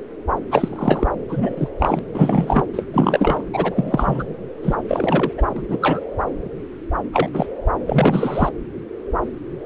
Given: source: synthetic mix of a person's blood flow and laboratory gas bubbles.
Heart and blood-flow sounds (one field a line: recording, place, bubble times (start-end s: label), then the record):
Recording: Doppler ultrasound of blood flow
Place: subclavian vein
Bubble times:
0.51-1.07 s: bubbles
1.28-1.68 s: bubbles
1.79-1.99 s: bubbles
2.14-2.64 s: bubbles
2.73-2.86 s: bubbles
2.93-3.44 s: bubbles
3.53-4.24 s: bubbles
4.62-4.75 s: bubbles
4.88-5.33 s: bubbles
5.38-5.42 s: bubbles
5.56-5.78 s: bubbles
5.81-6.00 s: bubbles
7.12-7.29 s: bubbles
7.33-7.46 s: bubbles
7.86-8.49 s: bubbles
From the record:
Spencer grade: 3 (all of the cardiac periods contain showers or single bubble signals, but not dominating or overriding the cardiac motion signals)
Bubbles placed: anywhere in the cardiac cycle